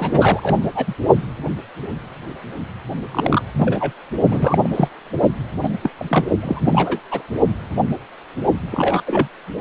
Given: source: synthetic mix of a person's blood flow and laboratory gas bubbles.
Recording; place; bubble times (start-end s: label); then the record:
Doppler ultrasound of blood flow; precordium
0.00-0.65 s: bubbles
0.75-0.95 s: bubbles
3.11-3.42 s: bubbles
3.56-3.92 s: bubbles
4.30-4.70 s: bubbles
4.75-4.88 s: bubbles
5.62-5.78 s: bubbles
5.83-5.90 s: bubbles
6.00-6.04 s: bubbles
6.09-6.27 s: bubbles
6.42-6.99 s: bubbles
7.11-7.22 s: bubbles
8.71-9.01 s: bubbles
9.06-9.28 s: bubbles
From the record:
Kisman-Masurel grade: 233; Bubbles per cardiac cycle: several, 3 to 8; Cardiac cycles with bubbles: 50 to 99%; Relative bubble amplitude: loud (0.450 to 0.775); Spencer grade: 3 (all of the cardiac periods contain showers or single bubble signals, but not dominating or overriding the cardiac motion signals); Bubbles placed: only in the low amplitude regions of the cardiac cycle